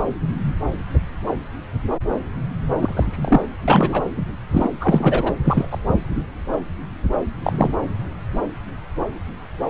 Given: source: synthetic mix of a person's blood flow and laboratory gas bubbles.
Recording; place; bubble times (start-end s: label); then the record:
Doppler ultrasound of blood flow; subclavian vein
2.81-3.42 s: bubbles
3.67-4.03 s: bubbles
4.52-4.70 s: bubbles
4.81-5.32 s: bubbles
5.44-5.67 s: bubbles
5.71-5.78 s: bubbles
7.43-7.70 s: bubbles
From the record:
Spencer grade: 2 (many but less than half of the cardiac periods contain bubble signals, singularly or in groups); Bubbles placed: anywhere in the cardiac cycle